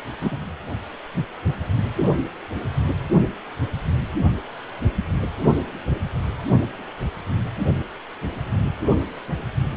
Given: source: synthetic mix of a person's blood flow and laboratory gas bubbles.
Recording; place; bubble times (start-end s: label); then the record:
Doppler ultrasound of blood flow; precordium
0.21-0.39 s: bubbles
From the record:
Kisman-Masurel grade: 213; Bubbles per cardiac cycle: several, 3 to 8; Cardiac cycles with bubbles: 1 to 10%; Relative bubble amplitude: loud (0.450 to 0.775); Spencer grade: 1 (occasional bubble signal discernible with the cardiac motion signal, with majority of cardiac periods free of bubbles); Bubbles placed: anywhere in the cardiac cycle